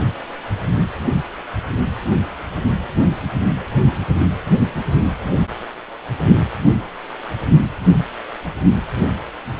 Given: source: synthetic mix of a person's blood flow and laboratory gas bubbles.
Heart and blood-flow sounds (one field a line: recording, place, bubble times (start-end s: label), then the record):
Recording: Doppler ultrasound of blood flow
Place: precordium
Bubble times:
no bubbles
From the record:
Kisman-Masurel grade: 000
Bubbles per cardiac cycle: 0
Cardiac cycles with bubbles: 0%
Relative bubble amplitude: no bubbles discernible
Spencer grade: 0 (complete lack of bubble signals)